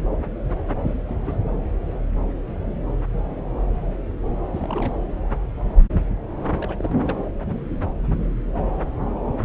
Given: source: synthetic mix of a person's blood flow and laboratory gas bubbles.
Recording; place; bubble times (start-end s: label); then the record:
Doppler ultrasound of blood flow; subclavian vein
0.81-1.03 s: bubbles
1.07-1.16 s: bubbles
1.22-1.37 s: bubbles
4.46-4.96 s: bubbles
6.58-6.98 s: bubbles
7.01-7.19 s: bubbles
From the record:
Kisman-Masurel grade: 221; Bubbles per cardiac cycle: several, 3 to 8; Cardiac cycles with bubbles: 10 to 50%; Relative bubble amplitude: barely perceptible (0.100 to 0.250); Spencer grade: 2 (many but less than half of the cardiac periods contain bubble signals, singularly or in groups); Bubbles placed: anywhere in the cardiac cycle